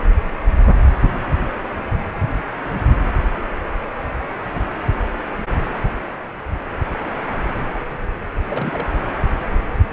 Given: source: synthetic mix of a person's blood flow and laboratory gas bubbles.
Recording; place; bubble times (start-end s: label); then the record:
Doppler ultrasound of blood flow; precordium
8.50-8.87 s: bubbles
From the record:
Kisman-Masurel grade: 211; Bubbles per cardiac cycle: several, 3 to 8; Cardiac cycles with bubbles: 1 to 10%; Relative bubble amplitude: barely perceptible (0.100 to 0.250); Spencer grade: 1 (occasional bubble signal discernible with the cardiac motion signal, with majority of cardiac periods free of bubbles); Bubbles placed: anywhere in the cardiac cycle